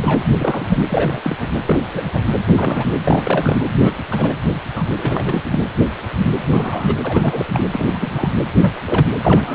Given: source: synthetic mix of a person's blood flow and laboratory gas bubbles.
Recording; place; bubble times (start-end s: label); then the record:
Doppler ultrasound of blood flow; precordium
0.02-0.22 s: bubbles
0.31-0.76 s: bubbles
0.89-1.20 s: bubbles
1.24-1.36 s: bubbles
1.39-1.48 s: bubbles
1.66-1.79 s: bubbles
1.91-2.20 s: bubbles
2.46-2.92 s: bubbles
3.04-3.66 s: bubbles
3.79-3.94 s: bubbles
4.10-4.37 s: bubbles
4.75-4.84 s: bubbles
4.97-5.43 s: bubbles
5.48-5.60 s: bubbles
6.50-6.95 s: bubbles
7.04-7.63 s: bubbles
7.72-8.28 s: bubbles
8.61-8.73 s: bubbles
8.85-9.06 s: bubbles
9.22-9.55 s: bubbles
From the record:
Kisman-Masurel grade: 232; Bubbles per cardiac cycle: several, 3 to 8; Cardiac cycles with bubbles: 50 to 99%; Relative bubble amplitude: moderate (0.250 to 0.450); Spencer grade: 3 (all of the cardiac periods contain showers or single bubble signals, but not dominating or overriding the cardiac motion signals); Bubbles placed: anywhere in the cardiac cycle